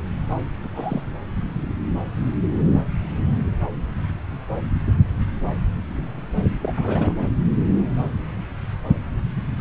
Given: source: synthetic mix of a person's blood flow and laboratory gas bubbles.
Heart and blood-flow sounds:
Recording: Doppler ultrasound of blood flow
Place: subclavian vein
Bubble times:
0.63-0.69 s: bubbles
0.74-1.02 s: bubbles
6.62-7.14 s: bubbles
From the record:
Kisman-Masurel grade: 221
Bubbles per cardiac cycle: several, 3 to 8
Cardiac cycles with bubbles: 10 to 50%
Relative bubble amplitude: barely perceptible (0.100 to 0.250)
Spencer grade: 2 (many but less than half of the cardiac periods contain bubble signals, singularly or in groups)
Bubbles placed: anywhere in the cardiac cycle

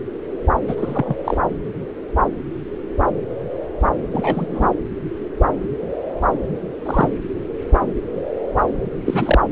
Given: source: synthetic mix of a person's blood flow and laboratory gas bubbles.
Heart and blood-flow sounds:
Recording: Doppler ultrasound of blood flow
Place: subclavian vein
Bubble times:
0.68-1.15 s: bubbles
1.24-1.38 s: bubbles
4.11-4.71 s: bubbles
6.85-7.13 s: bubbles
9.05-9.38 s: bubbles
From the record:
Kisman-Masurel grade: 222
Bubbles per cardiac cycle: several, 3 to 8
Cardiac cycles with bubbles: 10 to 50%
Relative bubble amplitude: moderate (0.250 to 0.450)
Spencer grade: 2 (many but less than half of the cardiac periods contain bubble signals, singularly or in groups)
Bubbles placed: anywhere in the cardiac cycle

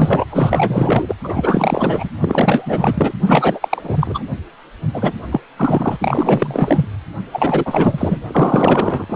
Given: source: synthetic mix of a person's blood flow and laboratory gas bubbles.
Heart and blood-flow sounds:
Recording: Doppler ultrasound of blood flow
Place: precordium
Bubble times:
0.00-0.25 s: bubbles
0.30-1.15 s: bubbles
1.24-2.09 s: bubbles
2.21-3.13 s: bubbles
3.26-3.68 s: bubbles
3.71-4.23 s: bubbles
4.93-5.13 s: bubbles
5.31-5.40 s: bubbles
5.57-5.96 s: bubbles
6.00-6.85 s: bubbles
7.33-8.19 s: bubbles
8.28-9.05 s: bubbles
9.10-9.16 s: bubbles
From the record:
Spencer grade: 4 (maximum detectable bubble signal sounding continuously throughout systole and diastole of every cardiac period, and overriding the amplitude of the normal cardiac signals)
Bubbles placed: anywhere in the cardiac cycle

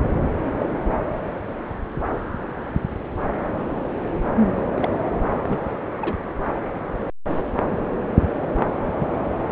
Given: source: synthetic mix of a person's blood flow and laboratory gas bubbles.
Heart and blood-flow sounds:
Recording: Doppler ultrasound of blood flow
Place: subclavian vein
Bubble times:
0.58-0.69 s: bubbles
4.55-4.98 s: bubbles
5.49-5.58 s: bubbles
5.98-6.29 s: bubbles
8.85-8.91 s: bubbles
8.98-9.07 s: bubbles
From the record:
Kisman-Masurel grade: 122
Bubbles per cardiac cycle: 1 to 2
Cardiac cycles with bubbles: 10 to 50%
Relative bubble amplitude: moderate (0.250 to 0.450)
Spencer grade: 2 (many but less than half of the cardiac periods contain bubble signals, singularly or in groups)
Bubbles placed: anywhere in the cardiac cycle

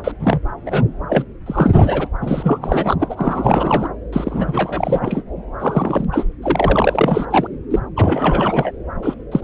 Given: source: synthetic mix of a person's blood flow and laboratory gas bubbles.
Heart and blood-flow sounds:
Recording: Doppler ultrasound of blood flow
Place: subclavian vein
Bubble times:
0.00-0.12 s: bubbles
0.19-0.40 s: bubbles
0.66-0.84 s: bubbles
1.09-1.24 s: bubbles
1.46-2.07 s: bubbles
2.21-2.58 s: bubbles
2.61-2.96 s: bubbles
2.99-3.88 s: bubbles
4.12-5.22 s: bubbles
5.60-6.05 s: bubbles
6.12-6.24 s: bubbles
6.42-7.26 s: bubbles
7.30-7.48 s: bubbles
7.71-7.79 s: bubbles
7.96-8.71 s: bubbles
9.02-9.14 s: bubbles
9.31-9.43 s: bubbles
From the record:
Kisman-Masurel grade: 343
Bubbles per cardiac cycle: rolling drumbeat, 9 or more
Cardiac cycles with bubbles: 100%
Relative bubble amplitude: loud (0.450 to 0.775)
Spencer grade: 3 (all of the cardiac periods contain showers or single bubble signals, but not dominating or overriding the cardiac motion signals)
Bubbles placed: anywhere in the cardiac cycle

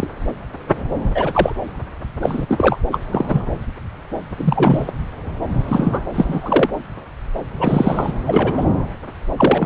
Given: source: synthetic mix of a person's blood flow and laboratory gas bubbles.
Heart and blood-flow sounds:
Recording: Doppler ultrasound of blood flow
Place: subclavian vein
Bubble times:
0.00-0.08 s: bubbles
1.15-1.52 s: bubbles
2.21-2.46 s: bubbles
2.48-2.76 s: bubbles
2.92-3.00 s: bubbles
3.11-3.42 s: bubbles
4.37-4.91 s: bubbles
5.68-6.00 s: bubbles
6.13-6.69 s: bubbles
7.59-8.11 s: bubbles
8.27-8.65 s: bubbles
9.37-9.66 s: bubbles
From the record:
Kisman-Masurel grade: 233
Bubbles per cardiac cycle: several, 3 to 8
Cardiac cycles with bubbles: 50 to 99%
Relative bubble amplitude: loud (0.450 to 0.775)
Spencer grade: 3 (all of the cardiac periods contain showers or single bubble signals, but not dominating or overriding the cardiac motion signals)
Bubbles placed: anywhere in the cardiac cycle

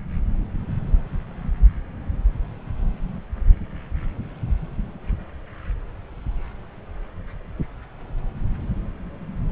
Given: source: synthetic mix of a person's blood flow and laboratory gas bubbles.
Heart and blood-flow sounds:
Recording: Doppler ultrasound of blood flow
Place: subclavian vein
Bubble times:
no bubbles
From the record:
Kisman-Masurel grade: 000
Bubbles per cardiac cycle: 0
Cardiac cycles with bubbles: 0%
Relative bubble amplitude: no bubbles discernible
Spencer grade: 0 (complete lack of bubble signals)

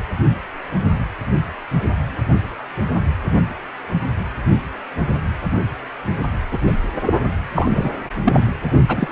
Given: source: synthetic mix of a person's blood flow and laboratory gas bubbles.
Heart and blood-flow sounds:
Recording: Doppler ultrasound of blood flow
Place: precordium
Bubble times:
6.52-6.58 s: bubbles
6.67-6.73 s: bubbles
7.06-7.14 s: bubbles
7.55-7.90 s: bubbles
8.24-8.41 s: bubbles
8.88-9.12 s: bubbles
From the record:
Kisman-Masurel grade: 223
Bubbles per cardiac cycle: several, 3 to 8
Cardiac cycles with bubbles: 10 to 50%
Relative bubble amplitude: loud (0.450 to 0.775)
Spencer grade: 2 (many but less than half of the cardiac periods contain bubble signals, singularly or in groups)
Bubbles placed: anywhere in the cardiac cycle

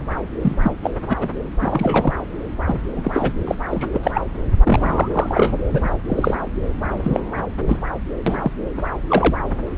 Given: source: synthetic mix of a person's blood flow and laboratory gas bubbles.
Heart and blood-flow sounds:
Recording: Doppler ultrasound of blood flow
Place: subclavian vein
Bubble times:
0.41-0.56 s: bubbles
0.62-0.72 s: bubbles
0.82-0.91 s: bubbles
1.09-1.17 s: bubbles
1.20-1.29 s: bubbles
1.60-2.13 s: bubbles
2.67-2.81 s: bubbles
2.96-3.33 s: bubbles
3.47-3.55 s: bubbles
3.71-4.00 s: bubbles
4.03-4.12 s: bubbles
4.14-4.21 s: bubbles
4.59-5.08 s: bubbles
5.13-5.53 s: bubbles
5.67-5.92 s: bubbles
6.08-6.39 s: bubbles
6.99-7.20 s: bubbles
7.67-7.77 s: bubbles
8.26-8.51 s: bubbles
8.77-8.82 s: bubbles
9.08-9.38 s: bubbles
From the record:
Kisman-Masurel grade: 232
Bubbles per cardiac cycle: several, 3 to 8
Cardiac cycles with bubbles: 50 to 99%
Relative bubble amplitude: moderate (0.250 to 0.450)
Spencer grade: 3 (all of the cardiac periods contain showers or single bubble signals, but not dominating or overriding the cardiac motion signals)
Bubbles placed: anywhere in the cardiac cycle

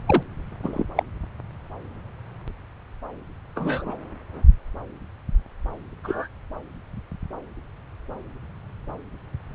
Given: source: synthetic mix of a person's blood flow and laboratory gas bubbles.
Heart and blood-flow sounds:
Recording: Doppler ultrasound of blood flow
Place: subclavian vein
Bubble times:
0.06-0.23 s: bubbles
0.62-0.85 s: bubbles
0.96-1.03 s: bubbles
3.56-3.95 s: bubbles
6.04-6.28 s: bubbles
From the record:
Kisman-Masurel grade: 122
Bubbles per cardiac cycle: 1 to 2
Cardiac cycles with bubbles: 10 to 50%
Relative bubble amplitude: moderate (0.250 to 0.450)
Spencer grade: 2 (many but less than half of the cardiac periods contain bubble signals, singularly or in groups)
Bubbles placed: anywhere in the cardiac cycle

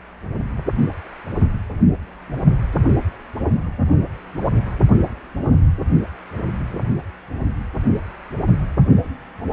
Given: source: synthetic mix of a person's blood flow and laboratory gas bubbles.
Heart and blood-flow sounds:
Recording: Doppler ultrasound of blood flow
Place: precordium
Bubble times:
no bubbles
From the record:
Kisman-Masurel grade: 000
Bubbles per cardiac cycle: 0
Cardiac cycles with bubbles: 0%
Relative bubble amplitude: no bubbles discernible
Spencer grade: 0 (complete lack of bubble signals)

